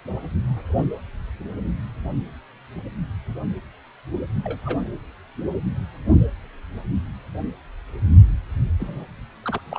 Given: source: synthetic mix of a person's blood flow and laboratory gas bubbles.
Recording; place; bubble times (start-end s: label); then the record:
Doppler ultrasound of blood flow; precordium
0.76-0.83 s: bubbles
4.44-4.88 s: bubbles
8.79-9.06 s: bubbles
9.43-9.61 s: bubbles
9.70-9.79 s: bubbles
From the record:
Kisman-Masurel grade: 121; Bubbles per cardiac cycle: 1 to 2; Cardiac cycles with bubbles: 10 to 50%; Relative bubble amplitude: barely perceptible (0.100 to 0.250); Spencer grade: 2 (many but less than half of the cardiac periods contain bubble signals, singularly or in groups); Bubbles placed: anywhere in the cardiac cycle